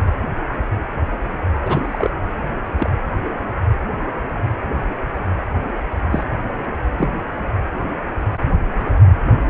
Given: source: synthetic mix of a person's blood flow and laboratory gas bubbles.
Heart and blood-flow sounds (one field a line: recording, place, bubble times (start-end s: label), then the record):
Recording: Doppler ultrasound of blood flow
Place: precordium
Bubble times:
1.65-2.10 s: bubbles
2.78-2.90 s: bubbles
6.11-6.23 s: bubbles
6.98-7.08 s: bubbles
From the record:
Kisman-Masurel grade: 122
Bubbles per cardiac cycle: 1 to 2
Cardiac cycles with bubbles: 10 to 50%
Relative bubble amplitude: moderate (0.250 to 0.450)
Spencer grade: 2 (many but less than half of the cardiac periods contain bubble signals, singularly or in groups)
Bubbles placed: anywhere in the cardiac cycle